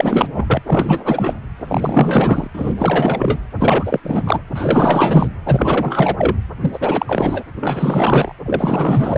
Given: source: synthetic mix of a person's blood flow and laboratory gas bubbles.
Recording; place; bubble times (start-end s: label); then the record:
Doppler ultrasound of blood flow; precordium
0.00-0.28 s: bubbles
0.34-0.60 s: bubbles
0.65-1.40 s: bubbles
1.56-2.48 s: bubbles
2.53-2.74 s: bubbles
2.78-3.40 s: bubbles
3.58-4.00 s: bubbles
4.03-4.42 s: bubbles
4.54-5.28 s: bubbles
5.46-6.36 s: bubbles
6.60-6.71 s: bubbles
6.74-7.42 s: bubbles
7.60-8.32 s: bubbles
8.45-9.17 s: bubbles
From the record:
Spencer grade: 4 (maximum detectable bubble signal sounding continuously throughout systole and diastole of every cardiac period, and overriding the amplitude of the normal cardiac signals); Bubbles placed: anywhere in the cardiac cycle